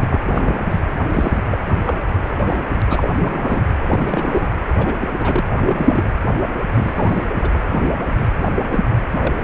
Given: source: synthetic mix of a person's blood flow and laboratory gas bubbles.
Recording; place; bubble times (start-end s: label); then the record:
Doppler ultrasound of blood flow; precordium
0.00-0.22 s: bubbles
0.33-0.42 s: bubbles
0.46-0.83 s: bubbles
1.12-1.39 s: bubbles
1.51-1.58 s: bubbles
1.68-1.76 s: bubbles
1.85-2.01 s: bubbles
2.23-2.67 s: bubbles
2.90-3.11 s: bubbles
3.17-3.65 s: bubbles
3.82-4.48 s: bubbles
4.67-4.74 s: bubbles
4.78-4.94 s: bubbles
5.00-5.45 s: bubbles
5.57-6.04 s: bubbles
6.72-7.24 s: bubbles
7.33-7.39 s: bubbles
7.42-7.49 s: bubbles
7.72-7.93 s: bubbles
8.13-8.29 s: bubbles
8.38-8.48 s: bubbles
8.70-8.86 s: bubbles
9.10-9.44 s: bubbles
From the record:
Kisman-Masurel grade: 242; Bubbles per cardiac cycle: several, 3 to 8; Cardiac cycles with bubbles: 100%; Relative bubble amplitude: moderate (0.250 to 0.450); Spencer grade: 3 (all of the cardiac periods contain showers or single bubble signals, but not dominating or overriding the cardiac motion signals); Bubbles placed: anywhere in the cardiac cycle